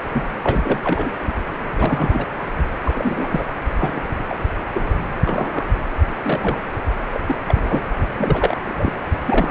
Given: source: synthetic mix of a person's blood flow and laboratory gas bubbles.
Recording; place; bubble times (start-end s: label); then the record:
Doppler ultrasound of blood flow; precordium
0.13-0.34 s: bubbles
0.43-0.80 s: bubbles
0.83-1.15 s: bubbles
1.24-1.32 s: bubbles
1.76-2.28 s: bubbles
2.84-3.45 s: bubbles
3.79-4.01 s: bubbles
4.29-4.37 s: bubbles
4.74-4.91 s: bubbles
5.25-5.69 s: bubbles
6.07-6.10 s: bubbles
6.23-6.61 s: bubbles
7.10-7.21 s: bubbles
7.28-7.36 s: bubbles
7.48-7.87 s: bubbles
8.15-8.57 s: bubbles
8.69-8.93 s: bubbles
9.12-9.18 s: bubbles
9.26-9.51 s: bubbles
From the record:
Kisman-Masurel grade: 242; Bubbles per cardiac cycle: several, 3 to 8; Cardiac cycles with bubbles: 100%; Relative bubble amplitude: moderate (0.250 to 0.450); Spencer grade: 3 (all of the cardiac periods contain showers or single bubble signals, but not dominating or overriding the cardiac motion signals); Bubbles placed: anywhere in the cardiac cycle